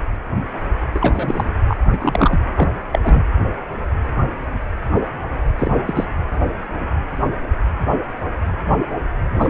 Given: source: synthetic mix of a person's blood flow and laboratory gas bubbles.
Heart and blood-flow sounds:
Doppler ultrasound of blood flow; precordium
0.94-1.50 s: bubbles
1.68-1.77 s: bubbles
1.81-2.40 s: bubbles
2.55-2.69 s: bubbles
2.92-2.99 s: bubbles
3.03-3.23 s: bubbles
5.58-5.71 s: bubbles
5.87-6.05 s: bubbles
9.39-9.50 s: bubbles
From the record:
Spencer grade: 2 (many but less than half of the cardiac periods contain bubble signals, singularly or in groups); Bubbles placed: anywhere in the cardiac cycle

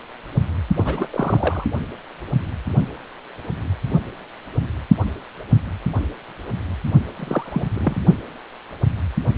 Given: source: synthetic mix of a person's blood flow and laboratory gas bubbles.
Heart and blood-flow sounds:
Doppler ultrasound of blood flow; precordium
0.77-1.06 s: bubbles
1.10-1.65 s: bubbles
7.16-7.63 s: bubbles
7.74-7.99 s: bubbles
From the record:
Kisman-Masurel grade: 222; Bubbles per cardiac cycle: several, 3 to 8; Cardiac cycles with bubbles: 10 to 50%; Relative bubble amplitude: moderate (0.250 to 0.450); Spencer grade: 2 (many but less than half of the cardiac periods contain bubble signals, singularly or in groups); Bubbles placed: only in the low amplitude regions of the cardiac cycle

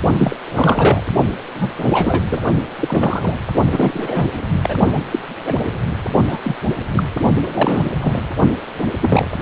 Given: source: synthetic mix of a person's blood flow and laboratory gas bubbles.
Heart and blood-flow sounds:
Doppler ultrasound of blood flow; precordium
0.18-0.36 s: bubbles
0.45-1.04 s: bubbles
1.55-2.24 s: bubbles
2.30-2.40 s: bubbles
2.79-3.35 s: bubbles
3.72-4.26 s: bubbles
4.62-4.75 s: bubbles
4.93-4.99 s: bubbles
5.11-5.19 s: bubbles
5.45-5.54 s: bubbles
5.59-5.69 s: bubbles
6.26-6.38 s: bubbles
6.42-6.55 s: bubbles
6.91-7.04 s: bubbles
7.42-7.82 s: bubbles
8.02-8.24 s: bubbles
9.00-9.28 s: bubbles
From the record:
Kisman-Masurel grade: 242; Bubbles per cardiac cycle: several, 3 to 8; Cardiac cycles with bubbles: 100%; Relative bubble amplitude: moderate (0.250 to 0.450); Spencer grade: 3 (all of the cardiac periods contain showers or single bubble signals, but not dominating or overriding the cardiac motion signals); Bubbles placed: only in the low amplitude regions of the cardiac cycle

